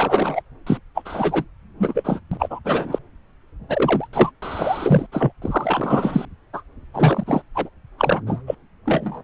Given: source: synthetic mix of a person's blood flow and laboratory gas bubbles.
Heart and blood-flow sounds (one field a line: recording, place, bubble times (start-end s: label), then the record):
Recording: Doppler ultrasound of blood flow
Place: subclavian vein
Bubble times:
0.00-0.41 s: bubbles
0.67-0.79 s: bubbles
0.95-1.45 s: bubbles
1.80-2.20 s: bubbles
2.31-2.60 s: bubbles
2.65-2.99 s: bubbles
3.69-4.08 s: bubbles
4.13-4.31 s: bubbles
4.42-5.07 s: bubbles
5.12-5.32 s: bubbles
5.42-6.25 s: bubbles
6.53-6.62 s: bubbles
6.94-7.42 s: bubbles
7.55-7.69 s: bubbles
7.98-8.21 s: bubbles
8.26-8.41 s: bubbles
8.47-8.55 s: bubbles
8.85-9.24 s: bubbles
From the record:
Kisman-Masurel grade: 343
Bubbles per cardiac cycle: rolling drumbeat, 9 or more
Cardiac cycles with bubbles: 100%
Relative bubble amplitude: loud (0.450 to 0.775)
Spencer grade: 3 (all of the cardiac periods contain showers or single bubble signals, but not dominating or overriding the cardiac motion signals)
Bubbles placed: anywhere in the cardiac cycle